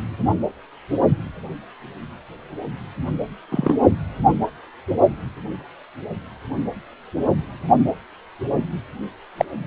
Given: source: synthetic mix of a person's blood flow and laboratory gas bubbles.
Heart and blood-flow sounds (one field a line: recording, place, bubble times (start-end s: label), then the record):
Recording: Doppler ultrasound of blood flow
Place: precordium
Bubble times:
3.52-3.73 s: bubbles
9.37-9.45 s: bubbles
From the record:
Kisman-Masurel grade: 123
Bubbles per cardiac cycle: 1 to 2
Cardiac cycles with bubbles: 10 to 50%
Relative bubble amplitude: loud (0.450 to 0.775)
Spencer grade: 2 (many but less than half of the cardiac periods contain bubble signals, singularly or in groups)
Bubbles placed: only in the low amplitude regions of the cardiac cycle